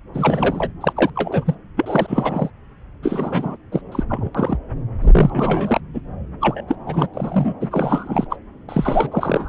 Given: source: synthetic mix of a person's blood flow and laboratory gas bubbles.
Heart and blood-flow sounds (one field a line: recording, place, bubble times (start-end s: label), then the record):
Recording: Doppler ultrasound of blood flow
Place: subclavian vein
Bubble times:
0.14-0.72 s: bubbles
0.80-0.92 s: bubbles
0.96-1.10 s: bubbles
1.16-1.54 s: bubbles
1.76-2.50 s: bubbles
3.02-3.56 s: bubbles
3.71-3.81 s: bubbles
3.92-4.04 s: bubbles
4.09-4.30 s: bubbles
4.34-4.58 s: bubbles
5.01-5.80 s: bubbles
5.93-6.00 s: bubbles
6.41-6.64 s: bubbles
6.68-6.75 s: bubbles
6.86-7.07 s: bubbles
7.13-7.54 s: bubbles
7.60-8.27 s: bubbles
8.30-8.37 s: bubbles
8.69-9.49 s: bubbles
From the record:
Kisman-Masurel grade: 342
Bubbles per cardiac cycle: rolling drumbeat, 9 or more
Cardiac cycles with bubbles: 100%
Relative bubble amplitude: moderate (0.250 to 0.450)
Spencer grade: 3 (all of the cardiac periods contain showers or single bubble signals, but not dominating or overriding the cardiac motion signals)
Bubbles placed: anywhere in the cardiac cycle